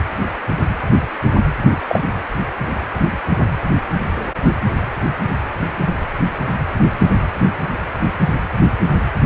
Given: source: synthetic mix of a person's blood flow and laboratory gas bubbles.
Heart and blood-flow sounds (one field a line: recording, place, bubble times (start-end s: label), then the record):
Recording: Doppler ultrasound of blood flow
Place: precordium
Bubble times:
1.69-1.77 s: bubbles
1.89-2.02 s: bubbles
From the record:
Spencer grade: 1 (occasional bubble signal discernible with the cardiac motion signal, with majority of cardiac periods free of bubbles)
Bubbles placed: anywhere in the cardiac cycle